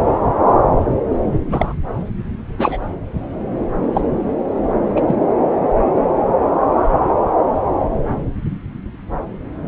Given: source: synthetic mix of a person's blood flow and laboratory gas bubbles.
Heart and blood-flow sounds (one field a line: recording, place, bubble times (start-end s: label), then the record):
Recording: Doppler ultrasound of blood flow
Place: subclavian vein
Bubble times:
1.50-1.74 s: bubbles
2.58-2.78 s: bubbles
3.92-4.02 s: bubbles
4.96-5.00 s: bubbles
5.07-5.16 s: bubbles
From the record:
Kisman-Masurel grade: 123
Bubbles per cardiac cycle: 1 to 2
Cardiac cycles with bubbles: 10 to 50%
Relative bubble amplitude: loud (0.450 to 0.775)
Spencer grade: 2 (many but less than half of the cardiac periods contain bubble signals, singularly or in groups)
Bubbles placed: anywhere in the cardiac cycle